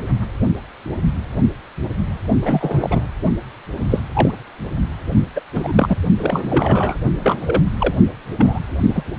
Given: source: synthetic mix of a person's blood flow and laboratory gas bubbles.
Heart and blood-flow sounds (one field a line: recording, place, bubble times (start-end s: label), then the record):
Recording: Doppler ultrasound of blood flow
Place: precordium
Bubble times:
2.42-3.07 s: bubbles
3.79-3.86 s: bubbles
3.90-4.00 s: bubbles
4.12-4.40 s: bubbles
5.36-5.40 s: bubbles
5.53-5.96 s: bubbles
6.17-6.98 s: bubbles
7.19-7.63 s: bubbles
7.80-7.94 s: bubbles
8.36-8.60 s: bubbles
8.86-9.03 s: bubbles
From the record:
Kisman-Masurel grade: 232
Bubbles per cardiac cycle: several, 3 to 8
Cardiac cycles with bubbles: 50 to 99%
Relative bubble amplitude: moderate (0.250 to 0.450)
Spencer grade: 3 (all of the cardiac periods contain showers or single bubble signals, but not dominating or overriding the cardiac motion signals)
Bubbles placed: only in the low amplitude regions of the cardiac cycle